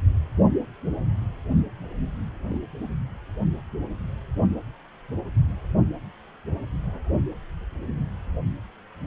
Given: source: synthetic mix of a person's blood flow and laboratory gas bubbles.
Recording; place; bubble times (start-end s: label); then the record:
Doppler ultrasound of blood flow; precordium
2.50-2.57 s: bubbles
From the record:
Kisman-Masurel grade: 111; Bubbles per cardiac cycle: 1 to 2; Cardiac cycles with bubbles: 1 to 10%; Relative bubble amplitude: barely perceptible (0.100 to 0.250); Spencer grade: 1 (occasional bubble signal discernible with the cardiac motion signal, with majority of cardiac periods free of bubbles); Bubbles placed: only in the low amplitude regions of the cardiac cycle